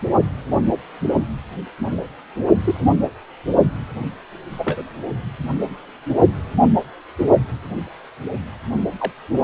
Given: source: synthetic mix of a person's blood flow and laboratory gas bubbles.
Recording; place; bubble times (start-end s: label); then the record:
Doppler ultrasound of blood flow; precordium
2.64-2.94 s: bubbles
4.52-4.82 s: bubbles
9.00-9.12 s: bubbles
From the record:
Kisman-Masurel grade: 122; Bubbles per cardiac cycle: 1 to 2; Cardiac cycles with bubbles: 10 to 50%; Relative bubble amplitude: moderate (0.250 to 0.450); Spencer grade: 2 (many but less than half of the cardiac periods contain bubble signals, singularly or in groups); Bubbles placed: only in the low amplitude regions of the cardiac cycle